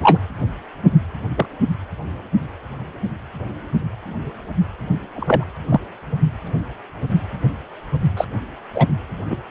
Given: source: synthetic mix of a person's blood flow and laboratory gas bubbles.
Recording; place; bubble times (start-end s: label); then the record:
Doppler ultrasound of blood flow; precordium
0.02-0.18 s: bubbles
1.36-1.45 s: bubbles
5.15-5.44 s: bubbles
5.71-5.79 s: bubbles
8.17-8.25 s: bubbles
8.75-8.87 s: bubbles
9.29-9.37 s: bubbles
From the record:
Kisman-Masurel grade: 123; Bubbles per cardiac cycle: 1 to 2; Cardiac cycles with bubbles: 10 to 50%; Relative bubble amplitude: loud (0.450 to 0.775); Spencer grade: 2 (many but less than half of the cardiac periods contain bubble signals, singularly or in groups); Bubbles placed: anywhere in the cardiac cycle